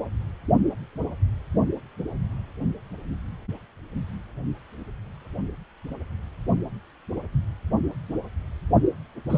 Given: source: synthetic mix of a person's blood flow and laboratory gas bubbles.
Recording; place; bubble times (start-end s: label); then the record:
Doppler ultrasound of blood flow; precordium
9.29-9.38 s: bubbles
From the record:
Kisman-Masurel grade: 112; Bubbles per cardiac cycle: 1 to 2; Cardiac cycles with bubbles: 1 to 10%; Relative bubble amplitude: moderate (0.250 to 0.450); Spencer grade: 1 (occasional bubble signal discernible with the cardiac motion signal, with majority of cardiac periods free of bubbles); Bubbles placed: only in the low amplitude regions of the cardiac cycle